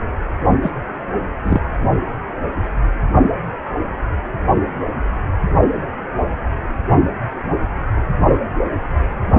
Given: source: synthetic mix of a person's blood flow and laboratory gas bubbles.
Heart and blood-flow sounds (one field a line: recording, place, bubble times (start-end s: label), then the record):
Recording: Doppler ultrasound of blood flow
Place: precordium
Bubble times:
0.62-0.71 s: bubbles
1.44-1.60 s: bubbles
From the record:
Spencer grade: 1 (occasional bubble signal discernible with the cardiac motion signal, with majority of cardiac periods free of bubbles)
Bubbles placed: only in the low amplitude regions of the cardiac cycle